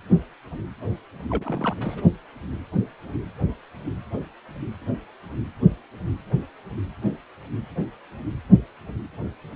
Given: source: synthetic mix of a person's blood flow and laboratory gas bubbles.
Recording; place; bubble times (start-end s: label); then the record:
Doppler ultrasound of blood flow; precordium
1.30-1.75 s: bubbles
1.78-2.05 s: bubbles
From the record:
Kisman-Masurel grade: 211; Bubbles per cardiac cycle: several, 3 to 8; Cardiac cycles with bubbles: 1 to 10%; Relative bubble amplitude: barely perceptible (0.100 to 0.250); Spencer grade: 1 (occasional bubble signal discernible with the cardiac motion signal, with majority of cardiac periods free of bubbles); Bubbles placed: anywhere in the cardiac cycle